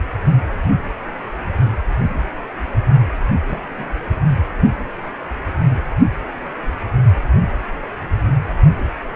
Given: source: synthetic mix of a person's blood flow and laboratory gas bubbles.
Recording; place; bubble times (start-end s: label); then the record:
Doppler ultrasound of blood flow; precordium
3.47-3.60 s: bubbles
3.69-3.90 s: bubbles
From the record:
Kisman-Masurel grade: 211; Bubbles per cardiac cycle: several, 3 to 8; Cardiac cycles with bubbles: 1 to 10%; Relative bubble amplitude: barely perceptible (0.100 to 0.250); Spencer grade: 1 (occasional bubble signal discernible with the cardiac motion signal, with majority of cardiac periods free of bubbles); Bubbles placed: anywhere in the cardiac cycle